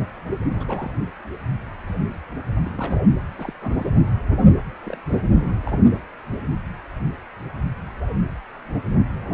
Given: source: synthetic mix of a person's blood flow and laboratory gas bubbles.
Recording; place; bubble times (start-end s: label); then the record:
Doppler ultrasound of blood flow; precordium
0.56-0.94 s: bubbles
2.64-2.72 s: bubbles
2.75-3.03 s: bubbles
3.36-3.54 s: bubbles
3.61-3.90 s: bubbles
4.83-4.98 s: bubbles
5.12-5.22 s: bubbles
5.38-5.85 s: bubbles
From the record:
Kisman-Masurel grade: 221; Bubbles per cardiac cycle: several, 3 to 8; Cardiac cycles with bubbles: 10 to 50%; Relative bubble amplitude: barely perceptible (0.100 to 0.250); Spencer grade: 2 (many but less than half of the cardiac periods contain bubble signals, singularly or in groups); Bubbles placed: anywhere in the cardiac cycle